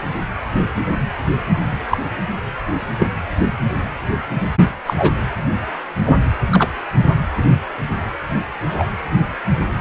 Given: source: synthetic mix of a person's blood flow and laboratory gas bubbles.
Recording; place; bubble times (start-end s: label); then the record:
Doppler ultrasound of blood flow; precordium
1.90-1.98 s: bubbles
2.99-3.11 s: bubbles
4.86-5.12 s: bubbles
6.05-6.19 s: bubbles
6.50-6.69 s: bubbles
8.65-8.92 s: bubbles
From the record:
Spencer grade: 2 (many but less than half of the cardiac periods contain bubble signals, singularly or in groups); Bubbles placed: anywhere in the cardiac cycle